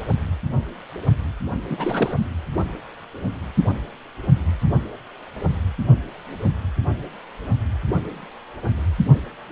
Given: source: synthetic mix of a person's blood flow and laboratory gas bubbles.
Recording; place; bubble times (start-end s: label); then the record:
Doppler ultrasound of blood flow; precordium
1.70-2.25 s: bubbles
From the record:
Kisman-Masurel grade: 222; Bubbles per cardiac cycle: several, 3 to 8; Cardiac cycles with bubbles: 10 to 50%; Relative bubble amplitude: moderate (0.250 to 0.450); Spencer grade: 2 (many but less than half of the cardiac periods contain bubble signals, singularly or in groups); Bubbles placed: anywhere in the cardiac cycle